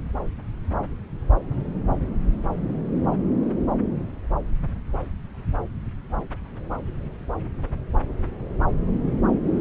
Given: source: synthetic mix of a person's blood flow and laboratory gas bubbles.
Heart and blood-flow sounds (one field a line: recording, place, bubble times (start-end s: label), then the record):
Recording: Doppler ultrasound of blood flow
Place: subclavian vein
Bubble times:
no bubbles
From the record:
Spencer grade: 0 (complete lack of bubble signals)